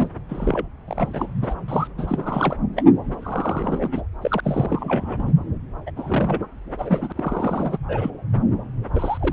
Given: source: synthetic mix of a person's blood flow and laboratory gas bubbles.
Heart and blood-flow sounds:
Doppler ultrasound of blood flow; subclavian vein
0.00-0.08 s: bubbles
0.29-0.67 s: bubbles
0.88-1.26 s: bubbles
1.42-1.55 s: bubbles
1.68-1.88 s: bubbles
1.97-2.56 s: bubbles
2.75-2.82 s: bubbles
3.22-4.01 s: bubbles
4.21-5.33 s: bubbles
5.86-5.91 s: bubbles
5.96-6.43 s: bubbles
6.78-7.12 s: bubbles
7.16-7.79 s: bubbles
7.89-8.10 s: bubbles
8.95-9.33 s: bubbles
From the record:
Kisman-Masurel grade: 342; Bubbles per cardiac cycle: rolling drumbeat, 9 or more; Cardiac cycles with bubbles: 100%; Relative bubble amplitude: moderate (0.250 to 0.450); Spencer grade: 3 (all of the cardiac periods contain showers or single bubble signals, but not dominating or overriding the cardiac motion signals); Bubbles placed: anywhere in the cardiac cycle

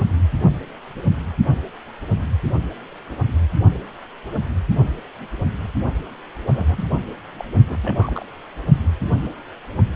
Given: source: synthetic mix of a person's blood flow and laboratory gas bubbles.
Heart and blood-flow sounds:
Doppler ultrasound of blood flow; precordium
6.54-6.87 s: bubbles
7.38-7.45 s: bubbles
7.70-7.76 s: bubbles
7.83-8.26 s: bubbles
From the record:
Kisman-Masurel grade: 221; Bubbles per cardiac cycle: several, 3 to 8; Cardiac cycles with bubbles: 10 to 50%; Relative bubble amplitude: barely perceptible (0.100 to 0.250); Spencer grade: 2 (many but less than half of the cardiac periods contain bubble signals, singularly or in groups); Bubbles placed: only in the low amplitude regions of the cardiac cycle

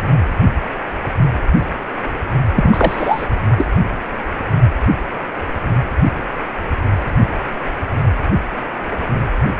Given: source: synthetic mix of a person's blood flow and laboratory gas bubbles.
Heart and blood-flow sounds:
Doppler ultrasound of blood flow; precordium
2.55-3.29 s: bubbles
3.56-3.67 s: bubbles
From the record:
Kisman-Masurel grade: 213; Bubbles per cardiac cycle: several, 3 to 8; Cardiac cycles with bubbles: 1 to 10%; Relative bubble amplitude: loud (0.450 to 0.775); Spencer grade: 1 (occasional bubble signal discernible with the cardiac motion signal, with majority of cardiac periods free of bubbles); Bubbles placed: anywhere in the cardiac cycle

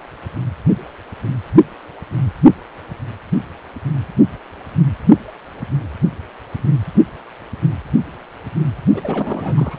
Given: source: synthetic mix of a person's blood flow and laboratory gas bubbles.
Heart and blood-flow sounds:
Doppler ultrasound of blood flow; precordium
8.94-9.77 s: bubbles
From the record:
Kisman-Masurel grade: 211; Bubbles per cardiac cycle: several, 3 to 8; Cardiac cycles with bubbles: 1 to 10%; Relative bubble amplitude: barely perceptible (0.100 to 0.250); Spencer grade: 1 (occasional bubble signal discernible with the cardiac motion signal, with majority of cardiac periods free of bubbles); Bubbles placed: only in the low amplitude regions of the cardiac cycle

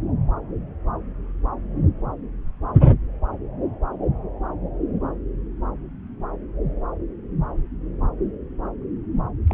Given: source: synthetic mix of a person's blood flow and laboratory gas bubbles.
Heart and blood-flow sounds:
Doppler ultrasound of blood flow; subclavian vein
9.47-9.54 s: bubbles
From the record:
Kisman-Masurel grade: 211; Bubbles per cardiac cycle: several, 3 to 8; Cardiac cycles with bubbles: 1 to 10%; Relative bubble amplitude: barely perceptible (0.100 to 0.250); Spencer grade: 1 (occasional bubble signal discernible with the cardiac motion signal, with majority of cardiac periods free of bubbles); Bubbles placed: anywhere in the cardiac cycle

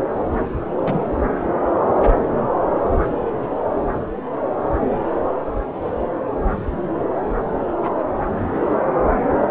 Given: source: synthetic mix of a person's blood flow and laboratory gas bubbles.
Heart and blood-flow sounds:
Doppler ultrasound of blood flow; subclavian vein
0.77-1.04 s: bubbles
From the record:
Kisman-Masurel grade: 112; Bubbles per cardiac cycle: 1 to 2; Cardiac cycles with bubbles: 1 to 10%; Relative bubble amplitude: moderate (0.250 to 0.450); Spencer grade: 1 (occasional bubble signal discernible with the cardiac motion signal, with majority of cardiac periods free of bubbles); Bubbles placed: anywhere in the cardiac cycle

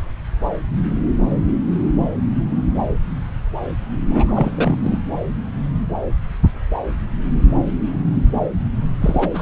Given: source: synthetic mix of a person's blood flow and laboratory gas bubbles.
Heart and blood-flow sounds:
Doppler ultrasound of blood flow; subclavian vein
4.11-4.76 s: bubbles
4.83-4.98 s: bubbles
9.01-9.42 s: bubbles
From the record:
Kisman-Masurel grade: 212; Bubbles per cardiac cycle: several, 3 to 8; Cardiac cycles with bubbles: 1 to 10%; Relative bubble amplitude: moderate (0.250 to 0.450); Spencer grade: 1 (occasional bubble signal discernible with the cardiac motion signal, with majority of cardiac periods free of bubbles); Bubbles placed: anywhere in the cardiac cycle

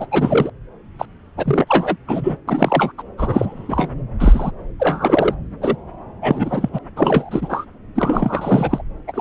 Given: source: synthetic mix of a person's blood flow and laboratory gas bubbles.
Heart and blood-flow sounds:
Doppler ultrasound of blood flow; subclavian vein
0.00-0.07 s: bubbles
0.11-0.50 s: bubbles
0.98-1.06 s: bubbles
1.37-1.96 s: bubbles
2.08-2.37 s: bubbles
2.48-2.92 s: bubbles
2.98-3.02 s: bubbles
3.18-3.92 s: bubbles
4.20-4.51 s: bubbles
4.79-5.34 s: bubbles
5.62-5.76 s: bubbles
6.21-6.70 s: bubbles
6.73-6.79 s: bubbles
6.96-7.65 s: bubbles
7.95-8.82 s: bubbles
9.07-9.21 s: bubbles
From the record:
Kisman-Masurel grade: 343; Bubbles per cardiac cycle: rolling drumbeat, 9 or more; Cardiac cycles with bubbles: 100%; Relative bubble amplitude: loud (0.450 to 0.775); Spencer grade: 3 (all of the cardiac periods contain showers or single bubble signals, but not dominating or overriding the cardiac motion signals); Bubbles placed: anywhere in the cardiac cycle

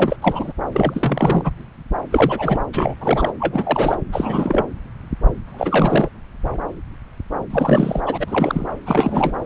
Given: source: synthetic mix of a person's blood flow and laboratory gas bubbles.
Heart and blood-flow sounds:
Doppler ultrasound of blood flow; subclavian vein
0.00-0.16 s: bubbles
0.22-0.52 s: bubbles
0.72-1.52 s: bubbles
2.10-2.59 s: bubbles
2.73-2.94 s: bubbles
3.00-3.31 s: bubbles
3.40-3.96 s: bubbles
4.12-4.66 s: bubbles
5.46-6.09 s: bubbles
7.50-8.01 s: bubbles
8.06-8.18 s: bubbles
8.20-8.66 s: bubbles
8.86-9.41 s: bubbles
From the record:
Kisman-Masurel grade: 332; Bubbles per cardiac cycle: rolling drumbeat, 9 or more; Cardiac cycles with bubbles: 50 to 99%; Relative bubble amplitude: moderate (0.250 to 0.450); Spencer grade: 3 (all of the cardiac periods contain showers or single bubble signals, but not dominating or overriding the cardiac motion signals); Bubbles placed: anywhere in the cardiac cycle

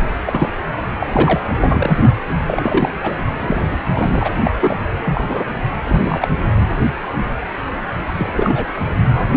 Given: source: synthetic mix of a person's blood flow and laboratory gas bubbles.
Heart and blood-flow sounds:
Doppler ultrasound of blood flow; precordium
0.26-0.48 s: bubbles
0.99-1.40 s: bubbles
1.60-2.00 s: bubbles
2.02-2.12 s: bubbles
2.47-2.89 s: bubbles
3.02-3.15 s: bubbles
3.40-3.67 s: bubbles
3.71-3.76 s: bubbles
3.90-4.29 s: bubbles
4.42-4.51 s: bubbles
4.61-4.78 s: bubbles
5.05-5.45 s: bubbles
5.88-6.28 s: bubbles
8.17-8.33 s: bubbles
8.36-8.65 s: bubbles
9.15-9.25 s: bubbles
9.34-9.37 s: bubbles
From the record:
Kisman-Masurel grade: 232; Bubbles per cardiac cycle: several, 3 to 8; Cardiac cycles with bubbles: 50 to 99%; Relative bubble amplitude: moderate (0.250 to 0.450); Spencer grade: 3 (all of the cardiac periods contain showers or single bubble signals, but not dominating or overriding the cardiac motion signals); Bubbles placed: anywhere in the cardiac cycle

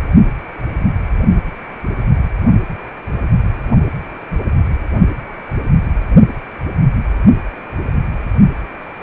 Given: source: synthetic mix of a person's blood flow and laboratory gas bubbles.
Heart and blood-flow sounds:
Doppler ultrasound of blood flow; precordium
no bubbles
From the record:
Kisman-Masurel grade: 000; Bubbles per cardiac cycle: 0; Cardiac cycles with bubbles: 0%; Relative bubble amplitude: no bubbles discernible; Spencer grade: 0 (complete lack of bubble signals)

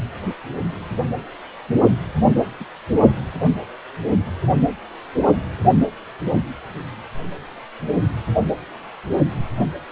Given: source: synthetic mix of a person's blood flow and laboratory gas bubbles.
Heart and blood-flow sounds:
Doppler ultrasound of blood flow; precordium
2.60-2.65 s: bubbles
From the record:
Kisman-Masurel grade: 121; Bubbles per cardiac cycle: 1 to 2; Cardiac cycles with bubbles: 10 to 50%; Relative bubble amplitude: barely perceptible (0.100 to 0.250); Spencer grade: 2 (many but less than half of the cardiac periods contain bubble signals, singularly or in groups); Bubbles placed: only in the low amplitude regions of the cardiac cycle

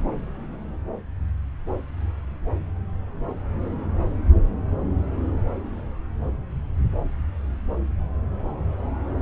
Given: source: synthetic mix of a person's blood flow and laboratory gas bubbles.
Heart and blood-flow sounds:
Doppler ultrasound of blood flow; subclavian vein
no bubbles
From the record:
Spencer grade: 0 (complete lack of bubble signals)

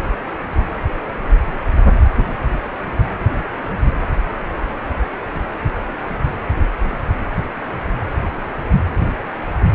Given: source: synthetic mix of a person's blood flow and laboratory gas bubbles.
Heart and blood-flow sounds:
Doppler ultrasound of blood flow; precordium
no bubbles
From the record:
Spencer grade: 0 (complete lack of bubble signals)

